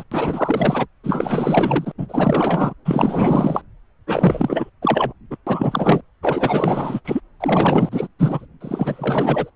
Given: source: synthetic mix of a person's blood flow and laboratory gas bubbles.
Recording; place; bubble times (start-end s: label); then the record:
Doppler ultrasound of blood flow; subclavian vein
0.00-0.03 s: bubbles
0.11-0.86 s: bubbles
1.04-1.92 s: bubbles
1.98-2.73 s: bubbles
2.85-3.61 s: bubbles
4.07-4.70 s: bubbles
4.82-5.12 s: bubbles
5.31-5.37 s: bubbles
5.47-6.01 s: bubbles
6.23-7.00 s: bubbles
7.04-7.21 s: bubbles
7.40-8.07 s: bubbles
8.18-8.46 s: bubbles
8.60-9.50 s: bubbles
From the record:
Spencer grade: 4 (maximum detectable bubble signal sounding continuously throughout systole and diastole of every cardiac period, and overriding the amplitude of the normal cardiac signals); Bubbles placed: anywhere in the cardiac cycle